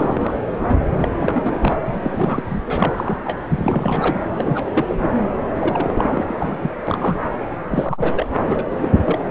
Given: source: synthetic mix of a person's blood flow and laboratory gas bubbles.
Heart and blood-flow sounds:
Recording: Doppler ultrasound of blood flow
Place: subclavian vein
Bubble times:
0.00-0.37 s: bubbles
0.68-0.75 s: bubbles
0.96-1.08 s: bubbles
1.19-1.75 s: bubbles
1.85-2.43 s: bubbles
2.49-2.61 s: bubbles
2.67-3.19 s: bubbles
3.24-3.39 s: bubbles
3.50-4.23 s: bubbles
4.37-4.95 s: bubbles
4.99-5.13 s: bubbles
5.60-6.25 s: bubbles
6.28-6.58 s: bubbles
6.62-6.71 s: bubbles
6.87-7.18 s: bubbles
7.71-8.27 s: bubbles
8.45-8.90 s: bubbles
9.06-9.19 s: bubbles
From the record:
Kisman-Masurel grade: 342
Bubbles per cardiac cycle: rolling drumbeat, 9 or more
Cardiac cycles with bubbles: 100%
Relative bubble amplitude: moderate (0.250 to 0.450)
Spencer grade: 3 (all of the cardiac periods contain showers or single bubble signals, but not dominating or overriding the cardiac motion signals)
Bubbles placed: anywhere in the cardiac cycle

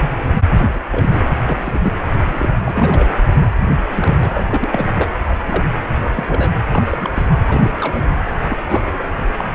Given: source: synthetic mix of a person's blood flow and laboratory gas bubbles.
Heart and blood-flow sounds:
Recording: Doppler ultrasound of blood flow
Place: precordium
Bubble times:
0.57-0.67 s: bubbles
0.75-0.79 s: bubbles
0.92-1.28 s: bubbles
1.45-1.79 s: bubbles
1.83-1.93 s: bubbles
2.24-2.48 s: bubbles
2.65-3.09 s: bubbles
3.90-4.45 s: bubbles
4.48-4.87 s: bubbles
4.95-5.12 s: bubbles
5.39-5.43 s: bubbles
5.46-5.64 s: bubbles
5.92-6.51 s: bubbles
6.70-7.10 s: bubbles
7.14-7.27 s: bubbles
7.48-7.75 s: bubbles
7.80-8.15 s: bubbles
8.49-8.57 s: bubbles
8.68-8.83 s: bubbles
8.98-9.04 s: bubbles
9.37-9.45 s: bubbles
From the record:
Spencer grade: 3 (all of the cardiac periods contain showers or single bubble signals, but not dominating or overriding the cardiac motion signals)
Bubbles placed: anywhere in the cardiac cycle

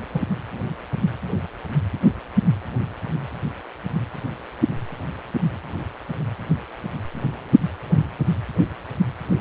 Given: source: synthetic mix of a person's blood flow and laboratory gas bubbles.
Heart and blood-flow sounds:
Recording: Doppler ultrasound of blood flow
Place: precordium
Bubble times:
0.14-0.23 s: bubbles
From the record:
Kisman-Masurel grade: 112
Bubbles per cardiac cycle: 1 to 2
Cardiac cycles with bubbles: 1 to 10%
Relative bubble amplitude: moderate (0.250 to 0.450)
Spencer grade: 1 (occasional bubble signal discernible with the cardiac motion signal, with majority of cardiac periods free of bubbles)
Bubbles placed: only in the low amplitude regions of the cardiac cycle

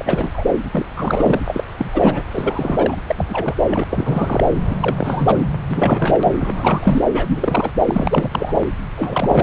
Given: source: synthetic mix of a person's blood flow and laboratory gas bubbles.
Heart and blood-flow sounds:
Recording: Doppler ultrasound of blood flow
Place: subclavian vein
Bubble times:
0.00-0.43 s: bubbles
0.71-0.85 s: bubbles
0.96-1.41 s: bubbles
1.46-1.64 s: bubbles
1.78-2.23 s: bubbles
2.31-2.96 s: bubbles
3.07-3.54 s: bubbles
3.68-3.84 s: bubbles
3.90-4.44 s: bubbles
4.70-5.45 s: bubbles
5.69-6.32 s: bubbles
6.38-7.71 s: bubbles
7.85-8.57 s: bubbles
8.95-9.43 s: bubbles
From the record:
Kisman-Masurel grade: 343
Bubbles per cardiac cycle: rolling drumbeat, 9 or more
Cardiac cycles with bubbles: 100%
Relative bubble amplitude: loud (0.450 to 0.775)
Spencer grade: 3 (all of the cardiac periods contain showers or single bubble signals, but not dominating or overriding the cardiac motion signals)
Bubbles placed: anywhere in the cardiac cycle

